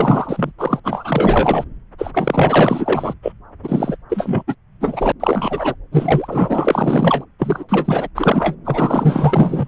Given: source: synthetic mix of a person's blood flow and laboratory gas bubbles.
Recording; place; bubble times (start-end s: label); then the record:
Doppler ultrasound of blood flow; subclavian vein
0.00-0.52 s: bubbles
0.58-0.80 s: bubbles
0.84-1.64 s: bubbles
1.98-2.11 s: bubbles
2.13-3.14 s: bubbles
3.23-3.32 s: bubbles
3.63-3.96 s: bubbles
4.10-4.43 s: bubbles
4.47-4.56 s: bubbles
4.80-5.12 s: bubbles
5.20-5.75 s: bubbles
5.92-7.25 s: bubbles
7.39-7.64 s: bubbles
7.69-8.09 s: bubbles
8.15-8.55 s: bubbles
8.65-9.68 s: bubbles
From the record:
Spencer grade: 4 (maximum detectable bubble signal sounding continuously throughout systole and diastole of every cardiac period, and overriding the amplitude of the normal cardiac signals); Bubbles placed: anywhere in the cardiac cycle